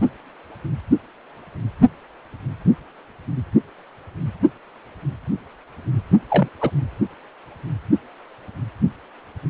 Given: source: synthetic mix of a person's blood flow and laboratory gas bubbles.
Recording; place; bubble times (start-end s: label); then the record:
Doppler ultrasound of blood flow; precordium
6.29-6.49 s: bubbles
6.60-6.70 s: bubbles
From the record:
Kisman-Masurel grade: 212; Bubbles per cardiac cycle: several, 3 to 8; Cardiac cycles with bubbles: 1 to 10%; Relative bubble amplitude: moderate (0.250 to 0.450); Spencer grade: 1 (occasional bubble signal discernible with the cardiac motion signal, with majority of cardiac periods free of bubbles); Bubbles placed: only in the low amplitude regions of the cardiac cycle